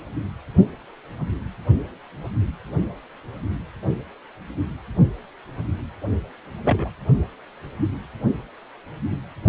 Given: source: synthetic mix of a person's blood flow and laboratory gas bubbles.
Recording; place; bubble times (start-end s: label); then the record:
Doppler ultrasound of blood flow; precordium
6.64-6.89 s: bubbles
From the record:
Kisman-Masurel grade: 112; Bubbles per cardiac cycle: 1 to 2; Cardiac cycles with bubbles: 1 to 10%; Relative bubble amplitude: moderate (0.250 to 0.450); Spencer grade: 1 (occasional bubble signal discernible with the cardiac motion signal, with majority of cardiac periods free of bubbles); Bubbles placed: anywhere in the cardiac cycle